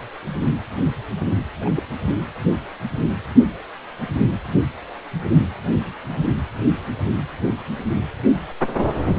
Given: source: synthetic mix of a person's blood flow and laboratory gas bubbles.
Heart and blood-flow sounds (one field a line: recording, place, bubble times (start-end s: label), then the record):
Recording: Doppler ultrasound of blood flow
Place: precordium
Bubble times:
1.61-1.70 s: bubbles
1.75-1.83 s: bubbles
From the record:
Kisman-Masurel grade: 211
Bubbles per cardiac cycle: several, 3 to 8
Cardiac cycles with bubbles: 1 to 10%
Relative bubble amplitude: barely perceptible (0.100 to 0.250)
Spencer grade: 1 (occasional bubble signal discernible with the cardiac motion signal, with majority of cardiac periods free of bubbles)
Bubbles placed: anywhere in the cardiac cycle